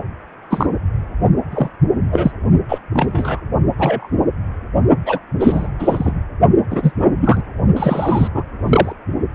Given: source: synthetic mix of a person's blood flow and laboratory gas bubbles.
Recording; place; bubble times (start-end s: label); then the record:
Doppler ultrasound of blood flow; precordium
0.50-0.67 s: bubbles
1.51-1.69 s: bubbles
2.11-2.31 s: bubbles
2.69-2.79 s: bubbles
2.93-3.40 s: bubbles
3.78-4.08 s: bubbles
5.06-5.19 s: bubbles
5.40-5.70 s: bubbles
5.79-6.12 s: bubbles
6.70-6.92 s: bubbles
6.99-7.09 s: bubbles
7.20-7.41 s: bubbles
7.76-8.28 s: bubbles
8.34-8.43 s: bubbles
8.68-8.93 s: bubbles
From the record:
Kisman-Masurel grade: 243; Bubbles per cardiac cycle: several, 3 to 8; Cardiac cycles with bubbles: 100%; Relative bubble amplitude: loud (0.450 to 0.775); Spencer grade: 3 (all of the cardiac periods contain showers or single bubble signals, but not dominating or overriding the cardiac motion signals); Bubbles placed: only in the low amplitude regions of the cardiac cycle